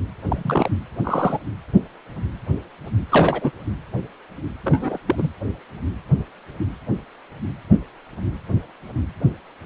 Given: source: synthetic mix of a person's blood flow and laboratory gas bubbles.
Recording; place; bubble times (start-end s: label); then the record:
Doppler ultrasound of blood flow; precordium
0.27-0.69 s: bubbles
1.03-1.38 s: bubbles
3.09-3.51 s: bubbles
4.64-4.98 s: bubbles
5.06-5.29 s: bubbles
From the record:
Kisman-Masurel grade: 222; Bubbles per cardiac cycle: several, 3 to 8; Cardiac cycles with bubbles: 10 to 50%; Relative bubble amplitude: moderate (0.250 to 0.450); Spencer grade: 2 (many but less than half of the cardiac periods contain bubble signals, singularly or in groups); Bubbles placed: anywhere in the cardiac cycle